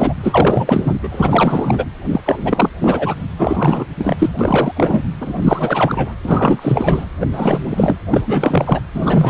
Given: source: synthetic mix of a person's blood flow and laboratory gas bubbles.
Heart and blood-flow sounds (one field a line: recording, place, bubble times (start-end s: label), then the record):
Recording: Doppler ultrasound of blood flow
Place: precordium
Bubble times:
0.00-0.15 s: bubbles
0.22-0.99 s: bubbles
1.02-1.08 s: bubbles
1.11-1.85 s: bubbles
2.09-2.21 s: bubbles
2.25-2.72 s: bubbles
2.80-3.15 s: bubbles
3.38-3.87 s: bubbles
3.96-4.30 s: bubbles
4.39-4.72 s: bubbles
4.76-5.02 s: bubbles
5.20-6.12 s: bubbles
6.25-7.06 s: bubbles
7.20-7.27 s: bubbles
7.31-7.97 s: bubbles
8.11-8.23 s: bubbles
8.26-8.82 s: bubbles
8.94-9.30 s: bubbles
From the record:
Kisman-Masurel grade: 444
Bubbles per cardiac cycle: continuous sound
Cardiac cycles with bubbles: 100%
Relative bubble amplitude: maximal (0.775 to 0.999)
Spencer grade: 4 (maximum detectable bubble signal sounding continuously throughout systole and diastole of every cardiac period, and overriding the amplitude of the normal cardiac signals)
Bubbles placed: anywhere in the cardiac cycle